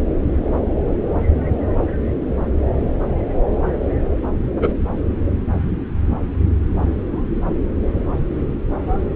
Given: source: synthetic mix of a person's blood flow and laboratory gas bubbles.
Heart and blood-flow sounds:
Doppler ultrasound of blood flow; subclavian vein
4.62-4.73 s: bubbles
From the record:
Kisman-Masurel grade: 123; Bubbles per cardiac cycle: 1 to 2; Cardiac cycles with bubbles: 10 to 50%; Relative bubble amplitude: loud (0.450 to 0.775); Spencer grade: 2 (many but less than half of the cardiac periods contain bubble signals, singularly or in groups); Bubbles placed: anywhere in the cardiac cycle

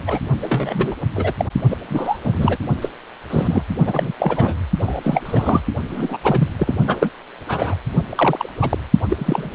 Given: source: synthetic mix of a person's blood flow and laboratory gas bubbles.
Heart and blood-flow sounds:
Doppler ultrasound of blood flow; precordium
0.05-0.19 s: bubbles
0.42-0.95 s: bubbles
1.15-1.33 s: bubbles
1.37-1.45 s: bubbles
1.71-1.77 s: bubbles
1.89-2.18 s: bubbles
2.25-2.56 s: bubbles
2.81-2.92 s: bubbles
3.29-3.63 s: bubbles
3.85-4.12 s: bubbles
4.19-4.54 s: bubbles
4.79-5.00 s: bubbles
5.03-5.21 s: bubbles
5.25-5.61 s: bubbles
5.89-6.17 s: bubbles
6.23-6.48 s: bubbles
6.59-6.73 s: bubbles
6.86-7.09 s: bubbles
7.48-7.74 s: bubbles
8.09-8.49 s: bubbles
8.61-8.78 s: bubbles
9.09-9.52 s: bubbles
From the record:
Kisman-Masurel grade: 242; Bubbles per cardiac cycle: several, 3 to 8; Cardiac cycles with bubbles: 100%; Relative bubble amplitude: moderate (0.250 to 0.450); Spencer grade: 3 (all of the cardiac periods contain showers or single bubble signals, but not dominating or overriding the cardiac motion signals); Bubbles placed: only in the low amplitude regions of the cardiac cycle

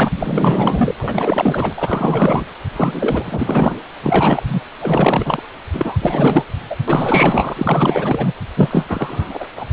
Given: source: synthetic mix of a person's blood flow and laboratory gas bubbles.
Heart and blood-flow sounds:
Doppler ultrasound of blood flow; precordium
0.00-0.09 s: bubbles
0.20-0.95 s: bubbles
1.00-1.73 s: bubbles
1.77-2.44 s: bubbles
2.76-3.80 s: bubbles
4.03-4.44 s: bubbles
4.46-4.61 s: bubbles
4.79-5.43 s: bubbles
5.73-5.97 s: bubbles
6.01-6.44 s: bubbles
6.70-6.76 s: bubbles
6.88-8.33 s: bubbles
8.56-8.86 s: bubbles
8.88-9.47 s: bubbles
9.56-9.66 s: bubbles
From the record:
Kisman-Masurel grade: 444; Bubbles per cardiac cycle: continuous sound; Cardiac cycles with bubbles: 100%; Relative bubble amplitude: maximal (0.775 to 0.999); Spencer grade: 4 (maximum detectable bubble signal sounding continuously throughout systole and diastole of every cardiac period, and overriding the amplitude of the normal cardiac signals); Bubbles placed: anywhere in the cardiac cycle

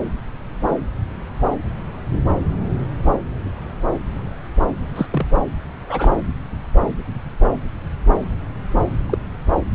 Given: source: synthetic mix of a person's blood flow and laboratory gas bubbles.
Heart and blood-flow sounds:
Doppler ultrasound of blood flow; subclavian vein
4.96-5.06 s: bubbles
5.12-5.26 s: bubbles
5.88-6.12 s: bubbles
9.09-9.18 s: bubbles
From the record:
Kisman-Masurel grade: 122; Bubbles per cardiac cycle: 1 to 2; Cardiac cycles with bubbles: 10 to 50%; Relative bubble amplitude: moderate (0.250 to 0.450); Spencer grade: 2 (many but less than half of the cardiac periods contain bubble signals, singularly or in groups); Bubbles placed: anywhere in the cardiac cycle

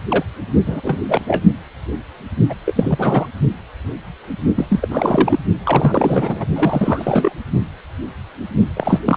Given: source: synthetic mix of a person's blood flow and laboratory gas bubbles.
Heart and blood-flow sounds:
Doppler ultrasound of blood flow; precordium
0.09-0.23 s: bubbles
0.66-1.04 s: bubbles
1.08-1.46 s: bubbles
2.49-2.54 s: bubbles
2.65-3.26 s: bubbles
4.56-4.66 s: bubbles
4.68-4.88 s: bubbles
4.91-5.39 s: bubbles
5.63-6.46 s: bubbles
6.56-7.32 s: bubbles
8.76-9.00 s: bubbles
9.04-9.17 s: bubbles
From the record:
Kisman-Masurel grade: 332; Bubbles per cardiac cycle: rolling drumbeat, 9 or more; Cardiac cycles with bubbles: 50 to 99%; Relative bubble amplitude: moderate (0.250 to 0.450); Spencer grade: 3 (all of the cardiac periods contain showers or single bubble signals, but not dominating or overriding the cardiac motion signals); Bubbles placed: only in the low amplitude regions of the cardiac cycle

